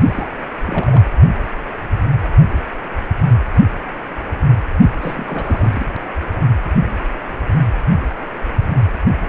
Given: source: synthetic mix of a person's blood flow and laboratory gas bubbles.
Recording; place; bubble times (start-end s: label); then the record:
Doppler ultrasound of blood flow; precordium
0.04-0.28 s: bubbles
0.66-1.02 s: bubbles
5.00-5.85 s: bubbles
From the record:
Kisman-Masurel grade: 222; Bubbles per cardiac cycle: several, 3 to 8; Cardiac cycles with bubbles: 10 to 50%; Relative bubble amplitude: moderate (0.250 to 0.450); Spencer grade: 2 (many but less than half of the cardiac periods contain bubble signals, singularly or in groups); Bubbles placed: anywhere in the cardiac cycle